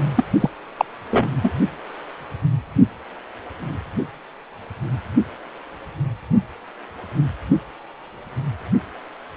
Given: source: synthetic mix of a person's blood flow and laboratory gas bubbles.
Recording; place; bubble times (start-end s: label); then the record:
Doppler ultrasound of blood flow; precordium
0.16-0.24 s: bubbles
0.40-0.50 s: bubbles
0.78-0.85 s: bubbles
1.10-1.28 s: bubbles
1.42-1.54 s: bubbles
From the record:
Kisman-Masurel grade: 223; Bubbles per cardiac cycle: several, 3 to 8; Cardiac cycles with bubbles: 10 to 50%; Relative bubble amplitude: loud (0.450 to 0.775); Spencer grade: 2 (many but less than half of the cardiac periods contain bubble signals, singularly or in groups); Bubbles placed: anywhere in the cardiac cycle